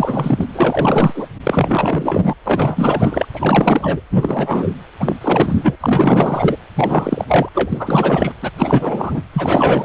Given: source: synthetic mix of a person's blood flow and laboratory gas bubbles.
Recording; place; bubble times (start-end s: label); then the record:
Doppler ultrasound of blood flow; precordium
0.00-0.46 s: bubbles
0.54-1.26 s: bubbles
1.43-2.34 s: bubbles
2.46-3.25 s: bubbles
3.33-4.01 s: bubbles
4.10-4.71 s: bubbles
5.00-5.16 s: bubbles
5.21-5.76 s: bubbles
5.80-6.58 s: bubbles
6.75-7.49 s: bubbles
7.54-8.33 s: bubbles
8.42-8.51 s: bubbles
8.58-9.21 s: bubbles
9.33-9.85 s: bubbles
From the record:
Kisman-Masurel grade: 444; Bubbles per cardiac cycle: continuous sound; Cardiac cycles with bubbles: 100%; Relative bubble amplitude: maximal (0.775 to 0.999); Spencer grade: 4 (maximum detectable bubble signal sounding continuously throughout systole and diastole of every cardiac period, and overriding the amplitude of the normal cardiac signals); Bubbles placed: anywhere in the cardiac cycle